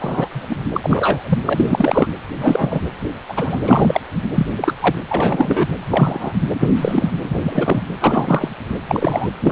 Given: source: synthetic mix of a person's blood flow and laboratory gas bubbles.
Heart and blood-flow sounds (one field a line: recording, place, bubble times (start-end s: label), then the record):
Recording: Doppler ultrasound of blood flow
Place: precordium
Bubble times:
0.01-0.29 s: bubbles
0.32-0.59 s: bubbles
0.74-1.39 s: bubbles
1.46-2.07 s: bubbles
2.41-2.81 s: bubbles
3.28-3.61 s: bubbles
3.64-4.00 s: bubbles
4.36-4.46 s: bubbles
4.51-4.73 s: bubbles
4.82-4.96 s: bubbles
5.08-5.67 s: bubbles
5.91-6.33 s: bubbles
6.59-6.69 s: bubbles
6.75-7.11 s: bubbles
7.24-7.38 s: bubbles
7.42-7.82 s: bubbles
8.00-8.49 s: bubbles
8.88-9.28 s: bubbles
9.40-9.52 s: bubbles
From the record:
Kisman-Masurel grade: 243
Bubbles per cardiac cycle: several, 3 to 8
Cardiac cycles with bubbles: 100%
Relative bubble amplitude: loud (0.450 to 0.775)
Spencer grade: 3 (all of the cardiac periods contain showers or single bubble signals, but not dominating or overriding the cardiac motion signals)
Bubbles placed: anywhere in the cardiac cycle